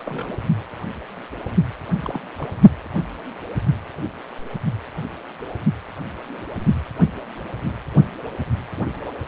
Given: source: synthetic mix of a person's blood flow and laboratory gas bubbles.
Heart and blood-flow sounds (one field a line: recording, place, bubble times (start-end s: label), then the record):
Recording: Doppler ultrasound of blood flow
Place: precordium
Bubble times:
0.00-0.37 s: bubbles
2.01-2.21 s: bubbles
2.38-2.49 s: bubbles
2.51-2.56 s: bubbles
From the record:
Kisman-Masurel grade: 221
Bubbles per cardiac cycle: several, 3 to 8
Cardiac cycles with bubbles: 10 to 50%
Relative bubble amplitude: barely perceptible (0.100 to 0.250)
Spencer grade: 2 (many but less than half of the cardiac periods contain bubble signals, singularly or in groups)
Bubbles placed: anywhere in the cardiac cycle